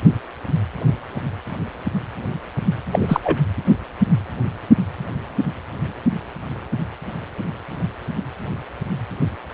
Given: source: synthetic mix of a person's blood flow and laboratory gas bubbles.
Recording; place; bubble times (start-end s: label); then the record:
Doppler ultrasound of blood flow; precordium
2.92-3.20 s: bubbles
3.23-3.38 s: bubbles
From the record:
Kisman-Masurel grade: 223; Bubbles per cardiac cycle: several, 3 to 8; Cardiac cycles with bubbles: 10 to 50%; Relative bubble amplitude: loud (0.450 to 0.775); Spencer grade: 2 (many but less than half of the cardiac periods contain bubble signals, singularly or in groups); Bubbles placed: anywhere in the cardiac cycle